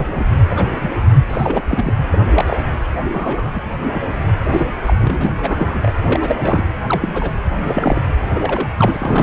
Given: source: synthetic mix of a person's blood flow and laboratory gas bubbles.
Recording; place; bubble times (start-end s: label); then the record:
Doppler ultrasound of blood flow; precordium
0.00-0.07 s: bubbles
0.15-0.21 s: bubbles
0.52-0.65 s: bubbles
0.82-0.90 s: bubbles
1.28-1.92 s: bubbles
2.11-2.18 s: bubbles
2.34-2.62 s: bubbles
3.12-3.62 s: bubbles
3.91-4.02 s: bubbles
4.50-4.72 s: bubbles
4.86-4.94 s: bubbles
4.98-5.31 s: bubbles
5.39-5.95 s: bubbles
6.02-6.36 s: bubbles
6.39-6.64 s: bubbles
6.87-7.30 s: bubbles
7.65-8.03 s: bubbles
8.31-8.70 s: bubbles
8.77-9.23 s: bubbles
From the record:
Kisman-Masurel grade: 242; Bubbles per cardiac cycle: several, 3 to 8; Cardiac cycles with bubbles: 100%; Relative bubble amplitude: moderate (0.250 to 0.450); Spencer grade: 3 (all of the cardiac periods contain showers or single bubble signals, but not dominating or overriding the cardiac motion signals); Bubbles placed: anywhere in the cardiac cycle